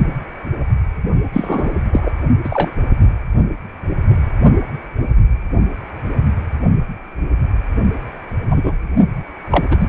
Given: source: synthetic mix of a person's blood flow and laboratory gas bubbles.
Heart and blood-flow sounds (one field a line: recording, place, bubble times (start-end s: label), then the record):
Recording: Doppler ultrasound of blood flow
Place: precordium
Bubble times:
1.33-1.69 s: bubbles
1.92-2.12 s: bubbles
2.44-2.71 s: bubbles
8.50-8.73 s: bubbles
9.51-9.65 s: bubbles
9.71-9.77 s: bubbles
9.79-9.88 s: bubbles
From the record:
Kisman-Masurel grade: 233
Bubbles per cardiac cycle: several, 3 to 8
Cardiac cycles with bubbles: 50 to 99%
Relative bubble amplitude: loud (0.450 to 0.775)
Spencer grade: 3 (all of the cardiac periods contain showers or single bubble signals, but not dominating or overriding the cardiac motion signals)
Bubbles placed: only in the low amplitude regions of the cardiac cycle